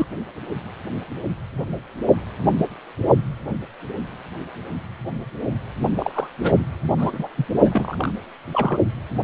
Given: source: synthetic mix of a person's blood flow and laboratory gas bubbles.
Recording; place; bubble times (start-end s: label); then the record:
Doppler ultrasound of blood flow; precordium
0.00-0.06 s: bubbles
5.95-6.28 s: bubbles
6.42-6.53 s: bubbles
6.97-7.28 s: bubbles
7.37-7.45 s: bubbles
7.65-8.12 s: bubbles
8.53-8.77 s: bubbles
From the record:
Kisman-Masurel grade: 232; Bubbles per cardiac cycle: several, 3 to 8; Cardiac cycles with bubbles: 50 to 99%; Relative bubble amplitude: moderate (0.250 to 0.450); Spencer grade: 3 (all of the cardiac periods contain showers or single bubble signals, but not dominating or overriding the cardiac motion signals); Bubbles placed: only in the low amplitude regions of the cardiac cycle